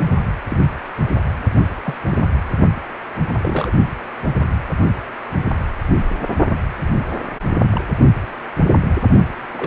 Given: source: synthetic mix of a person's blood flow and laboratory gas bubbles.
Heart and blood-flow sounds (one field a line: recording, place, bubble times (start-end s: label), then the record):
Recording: Doppler ultrasound of blood flow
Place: precordium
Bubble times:
0.50-0.68 s: bubbles
1.86-1.94 s: bubbles
2.09-2.25 s: bubbles
3.33-3.71 s: bubbles
7.71-7.81 s: bubbles
9.52-9.67 s: bubbles
From the record:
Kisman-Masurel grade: 122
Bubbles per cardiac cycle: 1 to 2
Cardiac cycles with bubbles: 10 to 50%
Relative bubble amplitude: moderate (0.250 to 0.450)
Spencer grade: 2 (many but less than half of the cardiac periods contain bubble signals, singularly or in groups)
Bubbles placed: only in the low amplitude regions of the cardiac cycle